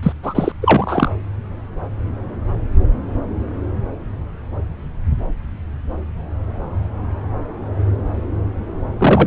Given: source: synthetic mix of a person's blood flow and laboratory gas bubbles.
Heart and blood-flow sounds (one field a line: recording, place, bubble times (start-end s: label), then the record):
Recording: Doppler ultrasound of blood flow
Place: subclavian vein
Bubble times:
0.02-0.12 s: bubbles
0.23-0.52 s: bubbles
0.61-1.13 s: bubbles
8.98-9.27 s: bubbles
From the record:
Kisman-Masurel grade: 223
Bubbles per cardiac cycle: several, 3 to 8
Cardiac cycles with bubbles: 10 to 50%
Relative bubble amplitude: loud (0.450 to 0.775)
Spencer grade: 2 (many but less than half of the cardiac periods contain bubble signals, singularly or in groups)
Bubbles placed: anywhere in the cardiac cycle